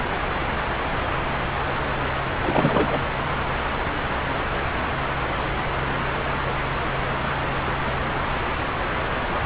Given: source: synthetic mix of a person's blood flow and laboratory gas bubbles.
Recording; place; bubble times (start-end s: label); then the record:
Doppler ultrasound of blood flow; subclavian vein
2.43-3.00 s: bubbles
From the record:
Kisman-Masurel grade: 212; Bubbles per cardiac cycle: several, 3 to 8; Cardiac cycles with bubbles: 1 to 10%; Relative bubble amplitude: moderate (0.250 to 0.450); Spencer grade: 1 (occasional bubble signal discernible with the cardiac motion signal, with majority of cardiac periods free of bubbles); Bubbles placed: anywhere in the cardiac cycle